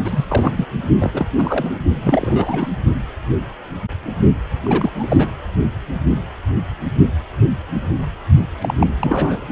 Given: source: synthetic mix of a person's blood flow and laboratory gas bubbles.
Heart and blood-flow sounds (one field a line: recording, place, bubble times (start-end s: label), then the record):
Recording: Doppler ultrasound of blood flow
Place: precordium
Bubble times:
0.04-0.25 s: bubbles
0.28-0.66 s: bubbles
1.01-1.11 s: bubbles
1.14-1.26 s: bubbles
1.37-1.80 s: bubbles
2.03-2.68 s: bubbles
4.63-4.90 s: bubbles
4.95-5.27 s: bubbles
8.37-8.46 s: bubbles
8.61-8.74 s: bubbles
8.79-8.87 s: bubbles
8.97-9.46 s: bubbles
From the record:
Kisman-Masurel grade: 332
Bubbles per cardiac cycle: rolling drumbeat, 9 or more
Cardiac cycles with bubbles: 50 to 99%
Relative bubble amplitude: moderate (0.250 to 0.450)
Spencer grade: 3 (all of the cardiac periods contain showers or single bubble signals, but not dominating or overriding the cardiac motion signals)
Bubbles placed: only in the low amplitude regions of the cardiac cycle